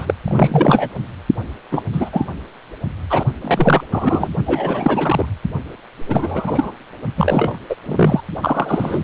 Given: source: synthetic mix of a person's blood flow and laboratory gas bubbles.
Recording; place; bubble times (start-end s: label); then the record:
Doppler ultrasound of blood flow; precordium
0.00-0.14 s: bubbles
0.24-0.89 s: bubbles
1.71-1.82 s: bubbles
1.92-2.10 s: bubbles
2.12-2.25 s: bubbles
3.10-3.23 s: bubbles
3.41-3.83 s: bubbles
3.92-4.29 s: bubbles
4.46-5.25 s: bubbles
6.09-6.72 s: bubbles
7.17-7.58 s: bubbles
7.69-7.75 s: bubbles
7.86-8.21 s: bubbles
8.41-9.03 s: bubbles
From the record:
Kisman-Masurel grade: 343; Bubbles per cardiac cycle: rolling drumbeat, 9 or more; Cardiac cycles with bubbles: 100%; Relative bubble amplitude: loud (0.450 to 0.775); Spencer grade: 3 (all of the cardiac periods contain showers or single bubble signals, but not dominating or overriding the cardiac motion signals); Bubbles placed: anywhere in the cardiac cycle